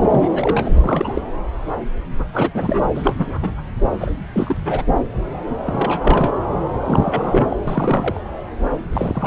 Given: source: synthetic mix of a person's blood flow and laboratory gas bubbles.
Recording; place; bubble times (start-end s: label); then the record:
Doppler ultrasound of blood flow; subclavian vein
0.02-0.69 s: bubbles
0.74-1.26 s: bubbles
2.33-2.50 s: bubbles
2.54-2.83 s: bubbles
2.94-3.13 s: bubbles
3.18-3.38 s: bubbles
3.42-3.55 s: bubbles
4.00-4.12 s: bubbles
4.33-4.57 s: bubbles
4.65-4.84 s: bubbles
5.65-6.40 s: bubbles
6.86-7.47 s: bubbles
7.50-7.57 s: bubbles
7.67-8.20 s: bubbles
8.90-9.26 s: bubbles
From the record:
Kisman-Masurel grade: 332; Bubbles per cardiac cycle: rolling drumbeat, 9 or more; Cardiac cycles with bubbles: 50 to 99%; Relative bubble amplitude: moderate (0.250 to 0.450); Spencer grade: 3 (all of the cardiac periods contain showers or single bubble signals, but not dominating or overriding the cardiac motion signals); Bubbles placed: anywhere in the cardiac cycle